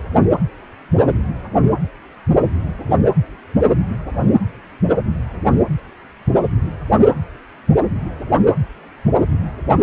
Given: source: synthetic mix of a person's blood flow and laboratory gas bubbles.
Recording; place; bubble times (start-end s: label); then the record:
Doppler ultrasound of blood flow; precordium
no bubbles
From the record:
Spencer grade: 0 (complete lack of bubble signals)